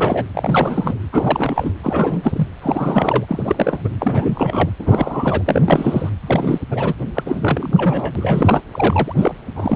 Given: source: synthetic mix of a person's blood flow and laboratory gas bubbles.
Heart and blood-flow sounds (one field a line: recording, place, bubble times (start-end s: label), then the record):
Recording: Doppler ultrasound of blood flow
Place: precordium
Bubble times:
0.00-0.26 s: bubbles
0.34-0.95 s: bubbles
1.12-1.72 s: bubbles
1.83-2.48 s: bubbles
2.61-3.25 s: bubbles
3.28-3.88 s: bubbles
3.99-4.70 s: bubbles
4.79-6.10 s: bubbles
6.22-6.58 s: bubbles
6.71-6.94 s: bubbles
7.14-8.61 s: bubbles
8.71-9.35 s: bubbles
9.56-9.76 s: bubbles
From the record:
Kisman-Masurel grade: 343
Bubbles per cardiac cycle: rolling drumbeat, 9 or more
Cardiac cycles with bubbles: 100%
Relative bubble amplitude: loud (0.450 to 0.775)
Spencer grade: 3 (all of the cardiac periods contain showers or single bubble signals, but not dominating or overriding the cardiac motion signals)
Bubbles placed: anywhere in the cardiac cycle